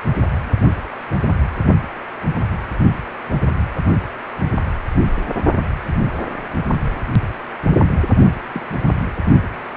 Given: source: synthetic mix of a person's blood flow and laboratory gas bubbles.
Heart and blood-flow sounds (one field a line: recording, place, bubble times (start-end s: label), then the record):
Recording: Doppler ultrasound of blood flow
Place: precordium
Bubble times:
8.54-8.62 s: bubbles
From the record:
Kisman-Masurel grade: 111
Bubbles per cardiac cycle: 1 to 2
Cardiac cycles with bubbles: 1 to 10%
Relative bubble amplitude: barely perceptible (0.100 to 0.250)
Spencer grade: 1 (occasional bubble signal discernible with the cardiac motion signal, with majority of cardiac periods free of bubbles)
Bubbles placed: only in the low amplitude regions of the cardiac cycle